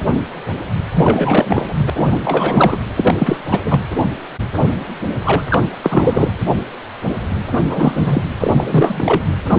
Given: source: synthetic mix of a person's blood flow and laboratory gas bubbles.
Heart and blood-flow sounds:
Doppler ultrasound of blood flow; precordium
0.94-1.79 s: bubbles
1.85-1.90 s: bubbles
1.96-2.06 s: bubbles
2.10-2.77 s: bubbles
2.98-3.15 s: bubbles
3.19-3.38 s: bubbles
3.50-3.60 s: bubbles
3.65-3.80 s: bubbles
5.25-5.42 s: bubbles
5.50-5.63 s: bubbles
5.83-6.30 s: bubbles
7.52-7.58 s: bubbles
7.67-8.23 s: bubbles
8.40-9.21 s: bubbles
9.50-9.59 s: bubbles
From the record:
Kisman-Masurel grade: 333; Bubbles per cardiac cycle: rolling drumbeat, 9 or more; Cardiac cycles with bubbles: 50 to 99%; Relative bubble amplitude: loud (0.450 to 0.775); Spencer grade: 3 (all of the cardiac periods contain showers or single bubble signals, but not dominating or overriding the cardiac motion signals); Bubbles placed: anywhere in the cardiac cycle

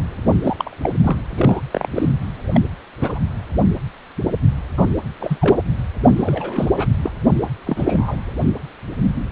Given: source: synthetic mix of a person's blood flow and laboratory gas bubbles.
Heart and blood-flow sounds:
Doppler ultrasound of blood flow; precordium
0.42-0.76 s: bubbles
0.81-0.91 s: bubbles
1.03-1.18 s: bubbles
1.38-1.61 s: bubbles
1.71-1.89 s: bubbles
1.95-2.09 s: bubbles
2.54-2.62 s: bubbles
3.01-3.19 s: bubbles
4.77-4.85 s: bubbles
5.20-5.64 s: bubbles
6.03-6.08 s: bubbles
6.16-6.71 s: bubbles
6.76-6.88 s: bubbles
7.02-7.12 s: bubbles
7.42-7.46 s: bubbles
7.66-8.16 s: bubbles
From the record:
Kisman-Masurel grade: 232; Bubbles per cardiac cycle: several, 3 to 8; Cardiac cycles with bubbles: 50 to 99%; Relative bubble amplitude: moderate (0.250 to 0.450); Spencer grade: 3 (all of the cardiac periods contain showers or single bubble signals, but not dominating or overriding the cardiac motion signals); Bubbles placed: anywhere in the cardiac cycle

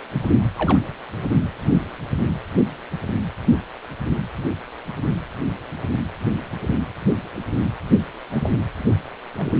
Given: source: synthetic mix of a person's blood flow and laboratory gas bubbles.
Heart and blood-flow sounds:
Doppler ultrasound of blood flow; precordium
0.58-0.78 s: bubbles
8.30-8.52 s: bubbles
9.38-9.58 s: bubbles
From the record:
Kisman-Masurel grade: 121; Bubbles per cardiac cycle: 1 to 2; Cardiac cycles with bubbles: 10 to 50%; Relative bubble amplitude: barely perceptible (0.100 to 0.250); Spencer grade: 2 (many but less than half of the cardiac periods contain bubble signals, singularly or in groups); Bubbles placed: anywhere in the cardiac cycle

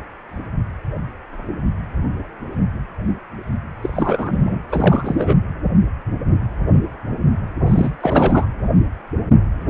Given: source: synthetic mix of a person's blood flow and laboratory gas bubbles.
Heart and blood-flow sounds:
Doppler ultrasound of blood flow; precordium
3.82-4.62 s: bubbles
4.69-5.36 s: bubbles
7.67-7.91 s: bubbles
8.00-8.45 s: bubbles
From the record:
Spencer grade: 2 (many but less than half of the cardiac periods contain bubble signals, singularly or in groups); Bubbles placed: anywhere in the cardiac cycle

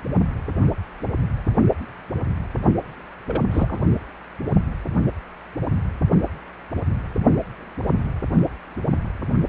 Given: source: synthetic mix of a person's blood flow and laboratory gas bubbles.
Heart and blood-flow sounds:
Doppler ultrasound of blood flow; precordium
3.26-3.44 s: bubbles
3.51-3.80 s: bubbles
From the record:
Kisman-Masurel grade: 211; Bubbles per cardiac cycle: several, 3 to 8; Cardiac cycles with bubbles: 1 to 10%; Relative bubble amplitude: barely perceptible (0.100 to 0.250); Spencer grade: 1 (occasional bubble signal discernible with the cardiac motion signal, with majority of cardiac periods free of bubbles); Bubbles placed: only in the low amplitude regions of the cardiac cycle

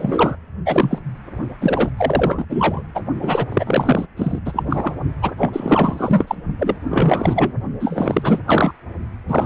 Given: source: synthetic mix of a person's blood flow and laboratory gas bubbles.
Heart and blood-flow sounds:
Doppler ultrasound of blood flow; precordium
0.00-0.36 s: bubbles
0.66-1.01 s: bubbles
1.61-1.91 s: bubbles
1.97-2.46 s: bubbles
2.50-2.82 s: bubbles
2.94-3.02 s: bubbles
3.22-3.45 s: bubbles
3.48-4.06 s: bubbles
4.16-4.40 s: bubbles
4.45-4.93 s: bubbles
5.21-5.32 s: bubbles
5.38-6.35 s: bubbles
6.58-6.78 s: bubbles
6.89-7.52 s: bubbles
7.79-8.39 s: bubbles
8.47-8.72 s: bubbles
9.28-9.46 s: bubbles
From the record:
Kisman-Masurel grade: 444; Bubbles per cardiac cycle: continuous sound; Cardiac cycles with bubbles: 100%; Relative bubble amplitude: maximal (0.775 to 0.999); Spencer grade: 4 (maximum detectable bubble signal sounding continuously throughout systole and diastole of every cardiac period, and overriding the amplitude of the normal cardiac signals); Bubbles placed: only in the low amplitude regions of the cardiac cycle

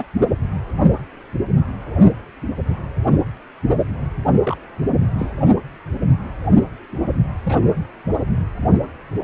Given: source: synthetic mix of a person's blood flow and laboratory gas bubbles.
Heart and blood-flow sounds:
Doppler ultrasound of blood flow; precordium
0.00-0.05 s: bubbles
4.45-4.56 s: bubbles
5.18-5.30 s: bubbles
7.43-7.57 s: bubbles
From the record:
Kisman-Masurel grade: 121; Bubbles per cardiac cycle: 1 to 2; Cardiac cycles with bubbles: 10 to 50%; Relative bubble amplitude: barely perceptible (0.100 to 0.250); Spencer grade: 2 (many but less than half of the cardiac periods contain bubble signals, singularly or in groups); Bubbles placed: anywhere in the cardiac cycle

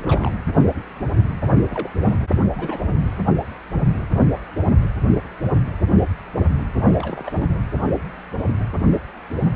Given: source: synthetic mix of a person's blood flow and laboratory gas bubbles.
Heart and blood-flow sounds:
Doppler ultrasound of blood flow; precordium
0.00-0.38 s: bubbles
1.66-1.92 s: bubbles
2.09-2.17 s: bubbles
2.43-2.50 s: bubbles
2.55-3.11 s: bubbles
6.86-7.59 s: bubbles
From the record:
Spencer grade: 2 (many but less than half of the cardiac periods contain bubble signals, singularly or in groups); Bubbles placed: anywhere in the cardiac cycle

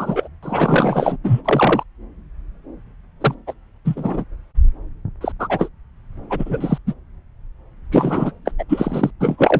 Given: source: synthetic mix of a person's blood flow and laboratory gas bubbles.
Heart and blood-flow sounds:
Doppler ultrasound of blood flow; subclavian vein
0.00-0.28 s: bubbles
0.43-1.17 s: bubbles
1.24-1.42 s: bubbles
1.45-1.83 s: bubbles
3.21-3.34 s: bubbles
3.46-3.53 s: bubbles
3.85-4.24 s: bubbles
5.21-5.32 s: bubbles
5.39-5.69 s: bubbles
6.29-6.78 s: bubbles
6.87-6.94 s: bubbles
7.91-8.32 s: bubbles
8.45-8.51 s: bubbles
8.59-8.64 s: bubbles
8.69-9.11 s: bubbles
9.20-9.60 s: bubbles
From the record:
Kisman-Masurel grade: 233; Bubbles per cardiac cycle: several, 3 to 8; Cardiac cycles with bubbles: 50 to 99%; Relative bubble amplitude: loud (0.450 to 0.775); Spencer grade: 3 (all of the cardiac periods contain showers or single bubble signals, but not dominating or overriding the cardiac motion signals); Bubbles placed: anywhere in the cardiac cycle

